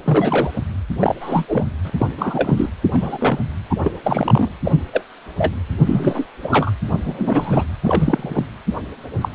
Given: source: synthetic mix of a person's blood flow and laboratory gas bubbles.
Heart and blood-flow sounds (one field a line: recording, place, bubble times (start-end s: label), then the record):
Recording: Doppler ultrasound of blood flow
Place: precordium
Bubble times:
0.03-0.51 s: bubbles
1.00-1.15 s: bubbles
1.20-1.46 s: bubbles
1.48-1.63 s: bubbles
1.84-1.90 s: bubbles
1.97-2.06 s: bubbles
2.17-2.69 s: bubbles
2.91-3.38 s: bubbles
3.69-3.75 s: bubbles
3.83-3.92 s: bubbles
4.04-4.50 s: bubbles
4.64-4.75 s: bubbles
4.93-5.04 s: bubbles
5.38-5.51 s: bubbles
5.85-6.27 s: bubbles
6.42-6.71 s: bubbles
7.04-7.66 s: bubbles
7.84-8.44 s: bubbles
9.21-9.29 s: bubbles
From the record:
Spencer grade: 3 (all of the cardiac periods contain showers or single bubble signals, but not dominating or overriding the cardiac motion signals)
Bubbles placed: anywhere in the cardiac cycle